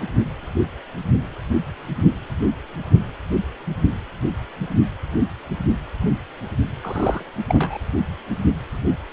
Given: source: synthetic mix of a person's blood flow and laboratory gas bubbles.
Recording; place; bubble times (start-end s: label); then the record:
Doppler ultrasound of blood flow; precordium
6.82-7.23 s: bubbles
7.48-7.79 s: bubbles
From the record:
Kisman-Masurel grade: 212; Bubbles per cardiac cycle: several, 3 to 8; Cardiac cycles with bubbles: 1 to 10%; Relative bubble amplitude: moderate (0.250 to 0.450); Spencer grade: 1 (occasional bubble signal discernible with the cardiac motion signal, with majority of cardiac periods free of bubbles); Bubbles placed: anywhere in the cardiac cycle